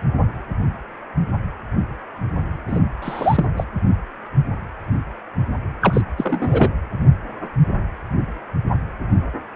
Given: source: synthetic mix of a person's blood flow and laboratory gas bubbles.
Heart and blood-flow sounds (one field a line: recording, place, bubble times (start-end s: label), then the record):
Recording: Doppler ultrasound of blood flow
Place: precordium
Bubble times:
2.68-2.79 s: bubbles
3.02-3.45 s: bubbles
3.56-3.64 s: bubbles
5.81-6.01 s: bubbles
6.17-6.74 s: bubbles
From the record:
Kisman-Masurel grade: 223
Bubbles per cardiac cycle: several, 3 to 8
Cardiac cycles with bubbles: 10 to 50%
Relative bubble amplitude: loud (0.450 to 0.775)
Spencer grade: 2 (many but less than half of the cardiac periods contain bubble signals, singularly or in groups)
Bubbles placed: anywhere in the cardiac cycle